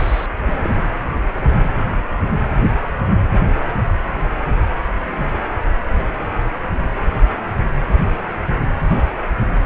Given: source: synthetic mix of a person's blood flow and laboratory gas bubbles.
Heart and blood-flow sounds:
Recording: Doppler ultrasound of blood flow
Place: precordium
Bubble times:
0.00-0.26 s: bubbles
0.42-0.81 s: bubbles
From the record:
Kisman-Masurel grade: 212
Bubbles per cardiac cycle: several, 3 to 8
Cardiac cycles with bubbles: 1 to 10%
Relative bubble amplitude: moderate (0.250 to 0.450)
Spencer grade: 1 (occasional bubble signal discernible with the cardiac motion signal, with majority of cardiac periods free of bubbles)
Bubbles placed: anywhere in the cardiac cycle

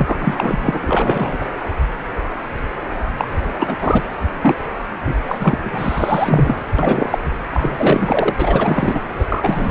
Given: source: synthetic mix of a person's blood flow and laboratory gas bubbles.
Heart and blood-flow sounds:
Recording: Doppler ultrasound of blood flow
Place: precordium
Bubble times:
0.00-1.37 s: bubbles
1.40-1.49 s: bubbles
3.18-3.28 s: bubbles
3.59-4.01 s: bubbles
4.42-4.57 s: bubbles
5.04-5.16 s: bubbles
5.29-5.58 s: bubbles
5.61-6.58 s: bubbles
6.78-7.18 s: bubbles
7.53-8.35 s: bubbles
8.39-9.00 s: bubbles
9.17-9.70 s: bubbles
From the record:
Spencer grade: 3 (all of the cardiac periods contain showers or single bubble signals, but not dominating or overriding the cardiac motion signals)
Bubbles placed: anywhere in the cardiac cycle

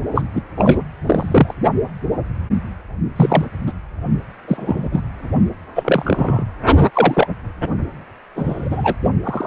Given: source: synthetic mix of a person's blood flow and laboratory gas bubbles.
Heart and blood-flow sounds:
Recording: Doppler ultrasound of blood flow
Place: precordium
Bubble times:
0.14-0.22 s: bubbles
0.34-0.42 s: bubbles
0.55-0.79 s: bubbles
1.06-1.54 s: bubbles
3.15-3.46 s: bubbles
3.67-3.73 s: bubbles
4.48-4.90 s: bubbles
4.92-5.00 s: bubbles
5.75-6.44 s: bubbles
6.94-7.27 s: bubbles
8.35-8.96 s: bubbles
9.23-9.47 s: bubbles
From the record:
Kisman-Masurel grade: 233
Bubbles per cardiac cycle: several, 3 to 8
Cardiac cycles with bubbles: 50 to 99%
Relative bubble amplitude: loud (0.450 to 0.775)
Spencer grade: 3 (all of the cardiac periods contain showers or single bubble signals, but not dominating or overriding the cardiac motion signals)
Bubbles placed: only in the low amplitude regions of the cardiac cycle

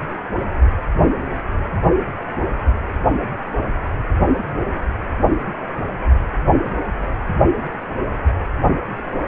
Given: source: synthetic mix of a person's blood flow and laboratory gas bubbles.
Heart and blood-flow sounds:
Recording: Doppler ultrasound of blood flow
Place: precordium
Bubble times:
no bubbles
From the record:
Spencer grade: 0 (complete lack of bubble signals)

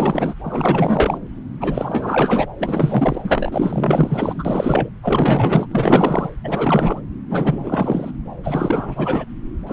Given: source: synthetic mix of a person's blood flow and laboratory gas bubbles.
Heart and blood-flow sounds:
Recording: Doppler ultrasound of blood flow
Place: subclavian vein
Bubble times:
0.00-0.34 s: bubbles
0.43-1.18 s: bubbles
1.60-2.47 s: bubbles
2.60-3.49 s: bubbles
3.52-4.89 s: bubbles
5.02-5.67 s: bubbles
5.71-6.30 s: bubbles
6.43-7.00 s: bubbles
7.29-8.11 s: bubbles
8.43-9.25 s: bubbles
9.66-9.73 s: bubbles
From the record:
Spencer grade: 4 (maximum detectable bubble signal sounding continuously throughout systole and diastole of every cardiac period, and overriding the amplitude of the normal cardiac signals)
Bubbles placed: anywhere in the cardiac cycle

